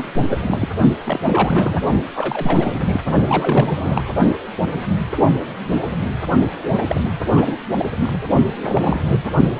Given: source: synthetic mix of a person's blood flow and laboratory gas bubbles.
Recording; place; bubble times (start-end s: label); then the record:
Doppler ultrasound of blood flow; precordium
0.00-0.08 s: bubbles
0.30-0.69 s: bubbles
1.04-1.20 s: bubbles
1.24-1.80 s: bubbles
2.15-3.00 s: bubbles
3.27-4.03 s: bubbles
6.71-6.79 s: bubbles
6.88-7.12 s: bubbles
7.33-7.58 s: bubbles
7.76-7.88 s: bubbles
8.00-8.20 s: bubbles
8.61-9.01 s: bubbles
9.24-9.29 s: bubbles
9.52-9.60 s: bubbles
From the record:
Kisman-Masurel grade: 332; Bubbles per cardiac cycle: rolling drumbeat, 9 or more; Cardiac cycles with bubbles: 50 to 99%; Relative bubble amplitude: moderate (0.250 to 0.450); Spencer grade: 3 (all of the cardiac periods contain showers or single bubble signals, but not dominating or overriding the cardiac motion signals); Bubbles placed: only in the low amplitude regions of the cardiac cycle